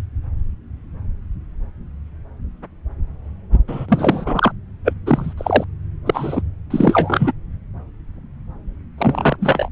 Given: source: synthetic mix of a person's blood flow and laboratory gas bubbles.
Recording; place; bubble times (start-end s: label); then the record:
Doppler ultrasound of blood flow; subclavian vein
3.67-3.86 s: bubbles
3.88-4.52 s: bubbles
4.84-4.93 s: bubbles
5.06-5.33 s: bubbles
5.37-5.64 s: bubbles
6.05-6.42 s: bubbles
6.70-7.33 s: bubbles
8.98-9.37 s: bubbles
9.40-9.69 s: bubbles
From the record:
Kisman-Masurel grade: 233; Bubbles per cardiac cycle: several, 3 to 8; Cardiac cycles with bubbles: 50 to 99%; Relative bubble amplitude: loud (0.450 to 0.775); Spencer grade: 3 (all of the cardiac periods contain showers or single bubble signals, but not dominating or overriding the cardiac motion signals); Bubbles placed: anywhere in the cardiac cycle